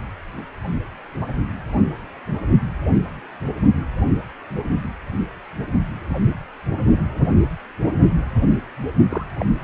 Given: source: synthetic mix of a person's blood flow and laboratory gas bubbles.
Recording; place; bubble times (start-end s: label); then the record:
Doppler ultrasound of blood flow; precordium
9.09-9.24 s: bubbles
9.38-9.46 s: bubbles
From the record:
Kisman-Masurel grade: 111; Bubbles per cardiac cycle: 1 to 2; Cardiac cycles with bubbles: 1 to 10%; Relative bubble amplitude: barely perceptible (0.100 to 0.250); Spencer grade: 1 (occasional bubble signal discernible with the cardiac motion signal, with majority of cardiac periods free of bubbles); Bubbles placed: only in the low amplitude regions of the cardiac cycle